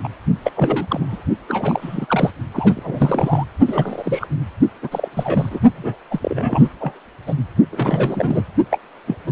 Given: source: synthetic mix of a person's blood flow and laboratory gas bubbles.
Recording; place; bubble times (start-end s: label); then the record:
Doppler ultrasound of blood flow; precordium
0.00-0.08 s: bubbles
0.43-0.51 s: bubbles
0.55-1.23 s: bubbles
1.48-2.30 s: bubbles
2.54-3.45 s: bubbles
3.67-4.26 s: bubbles
4.82-5.08 s: bubbles
5.16-5.59 s: bubbles
5.75-5.98 s: bubbles
6.11-6.20 s: bubbles
6.22-6.67 s: bubbles
6.80-6.94 s: bubbles
7.27-7.35 s: bubbles
7.72-8.43 s: bubbles
8.70-8.79 s: bubbles
9.06-9.15 s: bubbles
9.26-9.31 s: bubbles
From the record:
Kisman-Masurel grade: 342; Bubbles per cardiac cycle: rolling drumbeat, 9 or more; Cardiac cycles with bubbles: 100%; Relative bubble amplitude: moderate (0.250 to 0.450); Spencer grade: 3 (all of the cardiac periods contain showers or single bubble signals, but not dominating or overriding the cardiac motion signals); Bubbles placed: only in the low amplitude regions of the cardiac cycle